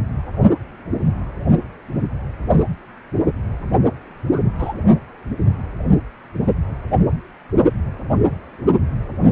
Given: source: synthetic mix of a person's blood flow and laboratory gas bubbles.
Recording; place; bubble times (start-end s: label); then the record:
Doppler ultrasound of blood flow; precordium
4.30-4.43 s: bubbles
4.58-4.73 s: bubbles
From the record:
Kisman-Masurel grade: 112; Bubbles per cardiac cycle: 1 to 2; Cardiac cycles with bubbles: 1 to 10%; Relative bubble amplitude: moderate (0.250 to 0.450); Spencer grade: 1 (occasional bubble signal discernible with the cardiac motion signal, with majority of cardiac periods free of bubbles); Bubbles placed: only in the low amplitude regions of the cardiac cycle